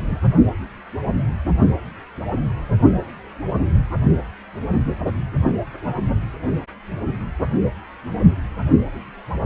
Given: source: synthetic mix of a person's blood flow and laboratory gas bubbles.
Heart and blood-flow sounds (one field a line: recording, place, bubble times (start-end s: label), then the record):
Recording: Doppler ultrasound of blood flow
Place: precordium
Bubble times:
0.00-0.04 s: bubbles
0.08-0.20 s: bubbles
From the record:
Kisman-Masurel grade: 111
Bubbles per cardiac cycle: 1 to 2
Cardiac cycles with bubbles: 1 to 10%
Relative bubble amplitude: barely perceptible (0.100 to 0.250)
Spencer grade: 1 (occasional bubble signal discernible with the cardiac motion signal, with majority of cardiac periods free of bubbles)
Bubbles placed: anywhere in the cardiac cycle